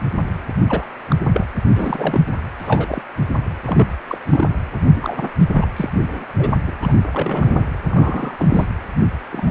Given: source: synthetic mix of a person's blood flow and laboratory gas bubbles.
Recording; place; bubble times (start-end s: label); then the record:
Doppler ultrasound of blood flow; precordium
0.68-0.84 s: bubbles
1.08-1.16 s: bubbles
1.25-1.47 s: bubbles
1.67-2.21 s: bubbles
2.58-3.02 s: bubbles
3.65-3.94 s: bubbles
4.08-4.18 s: bubbles
4.29-4.49 s: bubbles
4.96-5.29 s: bubbles
5.39-5.46 s: bubbles
5.53-5.67 s: bubbles
5.76-5.90 s: bubbles
5.99-6.26 s: bubbles
6.37-6.50 s: bubbles
6.67-6.72 s: bubbles
6.82-6.96 s: bubbles
7.12-7.66 s: bubbles
7.84-8.35 s: bubbles
8.39-8.67 s: bubbles
9.31-9.51 s: bubbles
From the record:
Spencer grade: 3 (all of the cardiac periods contain showers or single bubble signals, but not dominating or overriding the cardiac motion signals); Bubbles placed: anywhere in the cardiac cycle